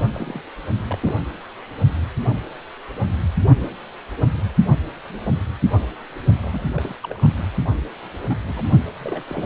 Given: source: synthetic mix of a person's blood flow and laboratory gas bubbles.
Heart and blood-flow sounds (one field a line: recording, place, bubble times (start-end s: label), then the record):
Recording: Doppler ultrasound of blood flow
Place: precordium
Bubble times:
0.14-0.42 s: bubbles
0.87-0.97 s: bubbles
1.00-1.14 s: bubbles
6.42-6.66 s: bubbles
6.76-6.95 s: bubbles
7.02-7.27 s: bubbles
8.27-8.38 s: bubbles
8.47-8.65 s: bubbles
8.98-9.23 s: bubbles
9.29-9.46 s: bubbles
From the record:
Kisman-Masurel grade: 221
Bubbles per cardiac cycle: several, 3 to 8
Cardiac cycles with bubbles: 10 to 50%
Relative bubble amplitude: barely perceptible (0.100 to 0.250)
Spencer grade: 2 (many but less than half of the cardiac periods contain bubble signals, singularly or in groups)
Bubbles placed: only in the low amplitude regions of the cardiac cycle